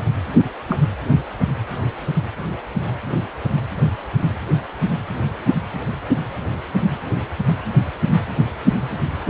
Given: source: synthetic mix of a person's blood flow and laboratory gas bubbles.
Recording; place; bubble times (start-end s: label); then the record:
Doppler ultrasound of blood flow; precordium
0.68-0.80 s: bubbles
From the record:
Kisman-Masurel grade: 112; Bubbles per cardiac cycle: 1 to 2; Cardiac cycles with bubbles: 1 to 10%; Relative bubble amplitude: moderate (0.250 to 0.450); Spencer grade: 1 (occasional bubble signal discernible with the cardiac motion signal, with majority of cardiac periods free of bubbles); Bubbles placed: anywhere in the cardiac cycle